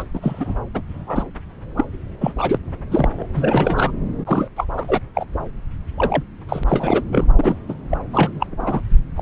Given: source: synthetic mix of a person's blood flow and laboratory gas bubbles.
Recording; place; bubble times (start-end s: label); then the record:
Doppler ultrasound of blood flow; subclavian vein
0.00-0.03 s: bubbles
0.14-0.55 s: bubbles
0.73-0.82 s: bubbles
0.90-1.23 s: bubbles
1.77-1.84 s: bubbles
2.21-2.33 s: bubbles
2.38-2.57 s: bubbles
2.90-3.26 s: bubbles
3.34-3.91 s: bubbles
4.25-4.48 s: bubbles
4.56-4.66 s: bubbles
4.76-4.83 s: bubbles
4.87-5.00 s: bubbles
5.14-5.25 s: bubbles
5.97-6.23 s: bubbles
6.49-6.63 s: bubbles
6.67-7.03 s: bubbles
7.11-7.25 s: bubbles
7.37-7.59 s: bubbles
7.69-7.74 s: bubbles
7.90-7.98 s: bubbles
8.13-8.31 s: bubbles
8.39-8.46 s: bubbles
8.59-8.80 s: bubbles
9.15-9.21 s: bubbles
From the record:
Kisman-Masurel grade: 242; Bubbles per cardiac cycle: several, 3 to 8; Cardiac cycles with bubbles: 100%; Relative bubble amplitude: moderate (0.250 to 0.450); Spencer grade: 3 (all of the cardiac periods contain showers or single bubble signals, but not dominating or overriding the cardiac motion signals); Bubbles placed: anywhere in the cardiac cycle